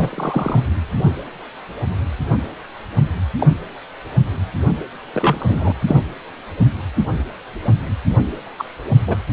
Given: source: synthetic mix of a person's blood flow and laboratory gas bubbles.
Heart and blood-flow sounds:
Doppler ultrasound of blood flow; precordium
0.00-0.61 s: bubbles
3.38-3.47 s: bubbles
5.13-5.72 s: bubbles
5.87-5.99 s: bubbles
8.58-8.64 s: bubbles
9.07-9.16 s: bubbles
From the record:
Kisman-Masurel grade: 123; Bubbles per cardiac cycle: 1 to 2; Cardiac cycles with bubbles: 10 to 50%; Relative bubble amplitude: loud (0.450 to 0.775); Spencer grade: 2 (many but less than half of the cardiac periods contain bubble signals, singularly or in groups); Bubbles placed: anywhere in the cardiac cycle

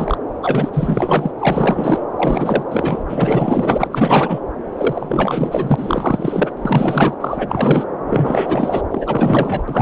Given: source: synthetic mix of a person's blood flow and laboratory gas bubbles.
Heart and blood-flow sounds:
Doppler ultrasound of blood flow; subclavian vein
0.00-0.18 s: bubbles
0.43-0.70 s: bubbles
0.73-1.31 s: bubbles
1.38-2.04 s: bubbles
2.15-2.63 s: bubbles
2.70-3.03 s: bubbles
3.08-3.88 s: bubbles
3.91-4.41 s: bubbles
4.77-6.52 s: bubbles
6.57-7.14 s: bubbles
7.21-7.83 s: bubbles
8.04-8.82 s: bubbles
8.91-9.64 s: bubbles
9.68-9.82 s: bubbles
From the record:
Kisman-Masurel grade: 444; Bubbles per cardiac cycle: continuous sound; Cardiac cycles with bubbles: 100%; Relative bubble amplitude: maximal (0.775 to 0.999); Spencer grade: 4 (maximum detectable bubble signal sounding continuously throughout systole and diastole of every cardiac period, and overriding the amplitude of the normal cardiac signals); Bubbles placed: anywhere in the cardiac cycle

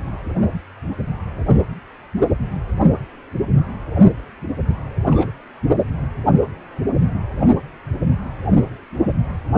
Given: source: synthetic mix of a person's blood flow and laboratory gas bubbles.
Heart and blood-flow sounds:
Doppler ultrasound of blood flow; precordium
5.10-5.31 s: bubbles
From the record:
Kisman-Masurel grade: 111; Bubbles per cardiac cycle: 1 to 2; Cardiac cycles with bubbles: 1 to 10%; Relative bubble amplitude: barely perceptible (0.100 to 0.250); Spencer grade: 1 (occasional bubble signal discernible with the cardiac motion signal, with majority of cardiac periods free of bubbles); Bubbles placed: anywhere in the cardiac cycle

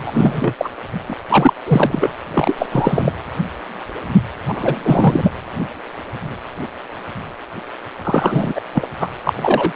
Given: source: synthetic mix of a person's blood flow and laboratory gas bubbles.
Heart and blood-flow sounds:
Doppler ultrasound of blood flow; precordium
0.07-0.53 s: bubbles
0.58-0.69 s: bubbles
1.06-1.14 s: bubbles
1.29-1.54 s: bubbles
1.67-2.12 s: bubbles
2.33-2.55 s: bubbles
2.58-2.66 s: bubbles
2.71-3.12 s: bubbles
4.48-5.31 s: bubbles
8.03-8.61 s: bubbles
8.72-8.88 s: bubbles
9.00-9.09 s: bubbles
9.24-9.33 s: bubbles
9.36-9.72 s: bubbles
From the record:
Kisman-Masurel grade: 333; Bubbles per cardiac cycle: rolling drumbeat, 9 or more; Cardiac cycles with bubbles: 50 to 99%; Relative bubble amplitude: loud (0.450 to 0.775); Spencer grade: 3 (all of the cardiac periods contain showers or single bubble signals, but not dominating or overriding the cardiac motion signals); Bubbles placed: anywhere in the cardiac cycle

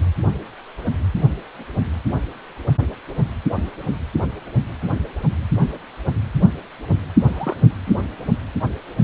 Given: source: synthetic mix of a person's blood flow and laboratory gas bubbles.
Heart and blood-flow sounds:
Doppler ultrasound of blood flow; precordium
7.26-7.56 s: bubbles
7.87-7.91 s: bubbles
From the record:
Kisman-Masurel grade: 211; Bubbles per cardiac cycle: several, 3 to 8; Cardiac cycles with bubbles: 1 to 10%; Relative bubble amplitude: barely perceptible (0.100 to 0.250); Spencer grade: 1 (occasional bubble signal discernible with the cardiac motion signal, with majority of cardiac periods free of bubbles); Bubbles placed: anywhere in the cardiac cycle

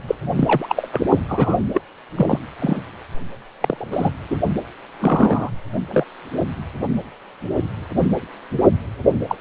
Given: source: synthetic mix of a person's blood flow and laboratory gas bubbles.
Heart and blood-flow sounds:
Doppler ultrasound of blood flow; precordium
0.07-0.15 s: bubbles
0.35-0.89 s: bubbles
0.91-1.02 s: bubbles
1.28-1.65 s: bubbles
1.74-1.81 s: bubbles
2.16-2.39 s: bubbles
2.60-2.81 s: bubbles
3.60-4.09 s: bubbles
4.30-4.38 s: bubbles
5.00-5.50 s: bubbles
5.91-6.04 s: bubbles
9.28-9.36 s: bubbles
9.39-9.41 s: bubbles
From the record:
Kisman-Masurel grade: 233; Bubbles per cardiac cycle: several, 3 to 8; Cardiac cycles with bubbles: 50 to 99%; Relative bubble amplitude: loud (0.450 to 0.775); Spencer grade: 3 (all of the cardiac periods contain showers or single bubble signals, but not dominating or overriding the cardiac motion signals); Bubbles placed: only in the low amplitude regions of the cardiac cycle

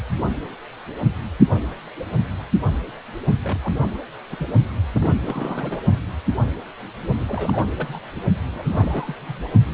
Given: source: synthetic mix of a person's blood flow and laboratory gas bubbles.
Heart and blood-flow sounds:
Doppler ultrasound of blood flow; precordium
3.43-3.58 s: bubbles
3.62-3.73 s: bubbles
3.81-3.98 s: bubbles
4.30-4.48 s: bubbles
4.95-5.10 s: bubbles
5.21-5.80 s: bubbles
7.18-7.68 s: bubbles
7.78-8.01 s: bubbles
8.15-8.21 s: bubbles
8.47-9.15 s: bubbles
9.28-9.44 s: bubbles
From the record:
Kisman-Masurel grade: 221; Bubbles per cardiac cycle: several, 3 to 8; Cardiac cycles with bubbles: 10 to 50%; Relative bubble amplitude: barely perceptible (0.100 to 0.250); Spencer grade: 2 (many but less than half of the cardiac periods contain bubble signals, singularly or in groups); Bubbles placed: only in the low amplitude regions of the cardiac cycle

